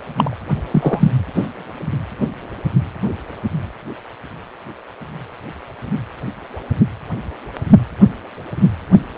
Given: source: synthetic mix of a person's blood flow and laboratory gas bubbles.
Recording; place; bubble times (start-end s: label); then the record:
Doppler ultrasound of blood flow; precordium
0.16-0.36 s: bubbles
0.71-1.11 s: bubbles
1.34-1.46 s: bubbles
From the record:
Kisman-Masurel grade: 213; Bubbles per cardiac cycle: several, 3 to 8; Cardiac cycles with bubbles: 1 to 10%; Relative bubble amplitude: loud (0.450 to 0.775); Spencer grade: 1 (occasional bubble signal discernible with the cardiac motion signal, with majority of cardiac periods free of bubbles); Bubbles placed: anywhere in the cardiac cycle